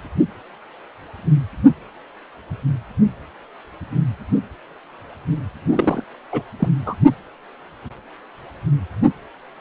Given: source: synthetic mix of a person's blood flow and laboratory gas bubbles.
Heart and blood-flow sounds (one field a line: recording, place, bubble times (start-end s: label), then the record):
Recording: Doppler ultrasound of blood flow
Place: precordium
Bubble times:
5.66-6.04 s: bubbles
6.32-6.42 s: bubbles
6.59-6.69 s: bubbles
6.85-6.95 s: bubbles
From the record:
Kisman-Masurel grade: 212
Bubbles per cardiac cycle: several, 3 to 8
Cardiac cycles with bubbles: 1 to 10%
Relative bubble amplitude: moderate (0.250 to 0.450)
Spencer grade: 1 (occasional bubble signal discernible with the cardiac motion signal, with majority of cardiac periods free of bubbles)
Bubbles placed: anywhere in the cardiac cycle